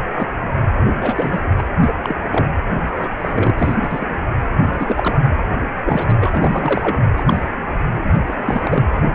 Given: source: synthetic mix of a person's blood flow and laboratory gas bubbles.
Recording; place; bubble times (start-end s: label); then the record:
Doppler ultrasound of blood flow; precordium
0.16-0.28 s: bubbles
0.71-0.87 s: bubbles
1.01-1.49 s: bubbles
1.57-1.63 s: bubbles
1.80-1.93 s: bubbles
2.04-2.15 s: bubbles
2.31-2.49 s: bubbles
2.75-3.12 s: bubbles
3.19-3.75 s: bubbles
3.81-4.07 s: bubbles
4.66-5.18 s: bubbles
5.38-5.44 s: bubbles
5.84-6.14 s: bubbles
6.21-7.00 s: bubbles
7.17-7.45 s: bubbles
8.06-8.20 s: bubbles
8.27-8.85 s: bubbles
8.95-9.00 s: bubbles
9.02-9.15 s: bubbles
From the record:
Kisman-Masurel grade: 242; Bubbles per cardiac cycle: several, 3 to 8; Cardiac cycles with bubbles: 100%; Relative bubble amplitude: moderate (0.250 to 0.450); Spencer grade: 3 (all of the cardiac periods contain showers or single bubble signals, but not dominating or overriding the cardiac motion signals); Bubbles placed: anywhere in the cardiac cycle